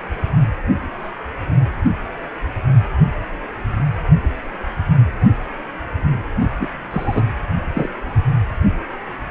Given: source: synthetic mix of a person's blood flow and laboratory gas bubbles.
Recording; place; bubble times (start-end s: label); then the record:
Doppler ultrasound of blood flow; precordium
6.59-6.68 s: bubbles
6.90-7.22 s: bubbles
7.73-7.89 s: bubbles
From the record:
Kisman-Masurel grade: 212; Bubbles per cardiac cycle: several, 3 to 8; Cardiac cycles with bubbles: 1 to 10%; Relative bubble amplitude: moderate (0.250 to 0.450); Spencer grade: 1 (occasional bubble signal discernible with the cardiac motion signal, with majority of cardiac periods free of bubbles); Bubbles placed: only in the low amplitude regions of the cardiac cycle